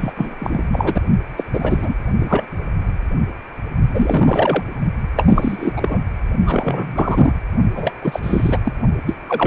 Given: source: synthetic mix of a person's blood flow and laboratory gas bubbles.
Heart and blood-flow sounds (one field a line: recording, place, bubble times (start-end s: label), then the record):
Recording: Doppler ultrasound of blood flow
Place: precordium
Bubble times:
0.00-0.12 s: bubbles
0.16-0.36 s: bubbles
0.39-0.70 s: bubbles
0.72-1.01 s: bubbles
1.37-1.45 s: bubbles
1.53-1.96 s: bubbles
2.18-2.46 s: bubbles
3.94-4.63 s: bubbles
5.16-6.03 s: bubbles
6.45-7.32 s: bubbles
7.75-7.93 s: bubbles
8.02-8.20 s: bubbles
8.23-8.60 s: bubbles
8.65-8.73 s: bubbles
9.06-9.15 s: bubbles
9.29-9.47 s: bubbles
From the record:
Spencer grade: 3 (all of the cardiac periods contain showers or single bubble signals, but not dominating or overriding the cardiac motion signals)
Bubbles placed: only in the low amplitude regions of the cardiac cycle